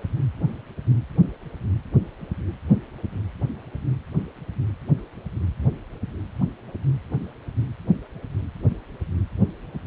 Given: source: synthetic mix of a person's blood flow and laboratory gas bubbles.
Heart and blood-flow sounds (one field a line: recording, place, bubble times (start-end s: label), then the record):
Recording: Doppler ultrasound of blood flow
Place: precordium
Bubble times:
no bubbles
From the record:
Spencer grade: 0 (complete lack of bubble signals)